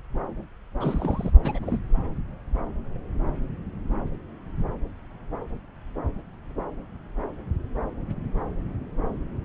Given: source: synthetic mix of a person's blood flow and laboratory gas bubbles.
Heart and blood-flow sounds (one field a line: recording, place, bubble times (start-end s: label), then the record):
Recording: Doppler ultrasound of blood flow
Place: subclavian vein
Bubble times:
0.81-1.31 s: bubbles
1.42-1.81 s: bubbles
From the record:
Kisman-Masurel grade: 211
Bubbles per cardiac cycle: several, 3 to 8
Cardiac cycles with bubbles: 1 to 10%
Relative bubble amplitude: barely perceptible (0.100 to 0.250)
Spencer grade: 1 (occasional bubble signal discernible with the cardiac motion signal, with majority of cardiac periods free of bubbles)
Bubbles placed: anywhere in the cardiac cycle